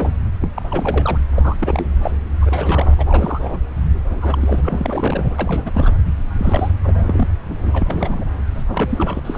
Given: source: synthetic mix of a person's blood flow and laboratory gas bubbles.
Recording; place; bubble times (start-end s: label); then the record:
Doppler ultrasound of blood flow; subclavian vein
0.00-0.13 s: bubbles
0.41-0.49 s: bubbles
0.54-1.19 s: bubbles
1.36-1.88 s: bubbles
2.02-2.11 s: bubbles
2.42-2.94 s: bubbles
2.98-3.59 s: bubbles
4.10-4.61 s: bubbles
4.63-5.29 s: bubbles
5.38-5.94 s: bubbles
6.37-6.73 s: bubbles
6.83-7.28 s: bubbles
7.49-8.24 s: bubbles
8.54-8.62 s: bubbles
8.67-9.20 s: bubbles
9.24-9.38 s: bubbles
From the record:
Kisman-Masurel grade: 342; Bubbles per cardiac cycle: rolling drumbeat, 9 or more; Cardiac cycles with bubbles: 100%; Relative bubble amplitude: moderate (0.250 to 0.450); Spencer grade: 3 (all of the cardiac periods contain showers or single bubble signals, but not dominating or overriding the cardiac motion signals); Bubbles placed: anywhere in the cardiac cycle